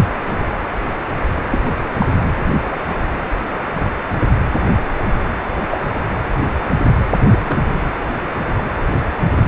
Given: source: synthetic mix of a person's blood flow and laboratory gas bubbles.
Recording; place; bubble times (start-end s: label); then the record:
Doppler ultrasound of blood flow; precordium
1.51-1.59 s: bubbles
2.00-2.06 s: bubbles
5.70-5.78 s: bubbles
7.00-7.05 s: bubbles
7.32-7.67 s: bubbles
From the record:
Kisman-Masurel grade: 122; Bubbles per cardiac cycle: 1 to 2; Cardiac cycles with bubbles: 10 to 50%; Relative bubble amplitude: moderate (0.250 to 0.450); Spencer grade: 2 (many but less than half of the cardiac periods contain bubble signals, singularly or in groups); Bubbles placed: anywhere in the cardiac cycle